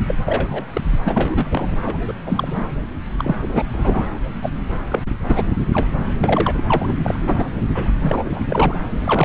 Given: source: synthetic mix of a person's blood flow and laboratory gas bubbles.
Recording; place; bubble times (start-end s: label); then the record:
Doppler ultrasound of blood flow; subclavian vein
0.08-0.15 s: bubbles
0.25-0.63 s: bubbles
0.73-0.81 s: bubbles
1.04-1.75 s: bubbles
1.85-1.96 s: bubbles
2.08-2.12 s: bubbles
2.27-2.64 s: bubbles
3.18-3.36 s: bubbles
3.42-3.63 s: bubbles
3.72-4.06 s: bubbles
4.42-4.50 s: bubbles
4.88-4.99 s: bubbles
5.29-5.43 s: bubbles
5.74-5.88 s: bubbles
6.20-6.62 s: bubbles
6.68-6.91 s: bubbles
7.04-7.44 s: bubbles
7.74-7.90 s: bubbles
8.03-8.41 s: bubbles
8.49-8.74 s: bubbles
8.98-9.25 s: bubbles
From the record:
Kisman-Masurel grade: 242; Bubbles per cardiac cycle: several, 3 to 8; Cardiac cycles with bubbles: 100%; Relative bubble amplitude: moderate (0.250 to 0.450); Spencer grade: 3 (all of the cardiac periods contain showers or single bubble signals, but not dominating or overriding the cardiac motion signals); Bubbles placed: anywhere in the cardiac cycle